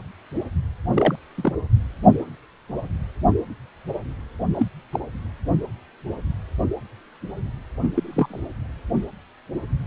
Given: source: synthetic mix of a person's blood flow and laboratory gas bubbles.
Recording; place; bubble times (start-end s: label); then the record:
Doppler ultrasound of blood flow; precordium
0.93-1.16 s: bubbles
1.35-1.52 s: bubbles
4.54-4.68 s: bubbles
4.92-5.00 s: bubbles
7.83-7.89 s: bubbles
7.94-8.40 s: bubbles
From the record:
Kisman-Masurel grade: 122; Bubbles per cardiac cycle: 1 to 2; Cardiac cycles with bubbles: 10 to 50%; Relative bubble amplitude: moderate (0.250 to 0.450); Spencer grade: 2 (many but less than half of the cardiac periods contain bubble signals, singularly or in groups); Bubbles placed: anywhere in the cardiac cycle